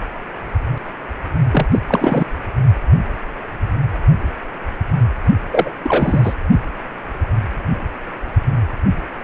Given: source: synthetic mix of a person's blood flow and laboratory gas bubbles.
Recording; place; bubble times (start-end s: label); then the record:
Doppler ultrasound of blood flow; precordium
1.52-1.67 s: bubbles
1.72-1.79 s: bubbles
1.87-2.29 s: bubbles
5.50-5.72 s: bubbles
5.83-6.35 s: bubbles
From the record:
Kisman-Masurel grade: 333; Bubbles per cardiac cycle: rolling drumbeat, 9 or more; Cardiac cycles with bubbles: 50 to 99%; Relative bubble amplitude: loud (0.450 to 0.775); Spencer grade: 3 (all of the cardiac periods contain showers or single bubble signals, but not dominating or overriding the cardiac motion signals); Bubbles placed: only in the low amplitude regions of the cardiac cycle